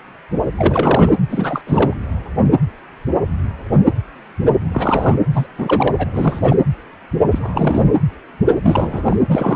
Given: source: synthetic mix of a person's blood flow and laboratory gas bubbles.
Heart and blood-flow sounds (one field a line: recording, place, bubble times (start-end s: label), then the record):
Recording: Doppler ultrasound of blood flow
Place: precordium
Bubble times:
0.57-1.15 s: bubbles
1.29-1.62 s: bubbles
1.67-1.94 s: bubbles
4.73-5.16 s: bubbles
5.33-5.47 s: bubbles
5.58-6.10 s: bubbles
6.14-6.56 s: bubbles
7.31-7.91 s: bubbles
8.63-9.16 s: bubbles
9.28-9.56 s: bubbles
From the record:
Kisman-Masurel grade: 332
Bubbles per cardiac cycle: rolling drumbeat, 9 or more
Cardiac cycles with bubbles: 50 to 99%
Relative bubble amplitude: moderate (0.250 to 0.450)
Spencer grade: 3 (all of the cardiac periods contain showers or single bubble signals, but not dominating or overriding the cardiac motion signals)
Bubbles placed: anywhere in the cardiac cycle